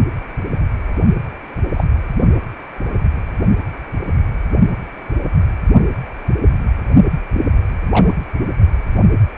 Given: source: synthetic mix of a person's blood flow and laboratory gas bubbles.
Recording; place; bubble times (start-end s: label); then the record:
Doppler ultrasound of blood flow; precordium
1.73-1.84 s: bubbles
7.34-7.41 s: bubbles
7.89-8.14 s: bubbles
From the record:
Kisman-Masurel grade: 122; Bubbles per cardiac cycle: 1 to 2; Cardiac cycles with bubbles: 10 to 50%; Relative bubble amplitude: moderate (0.250 to 0.450); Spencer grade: 2 (many but less than half of the cardiac periods contain bubble signals, singularly or in groups); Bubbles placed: only in the low amplitude regions of the cardiac cycle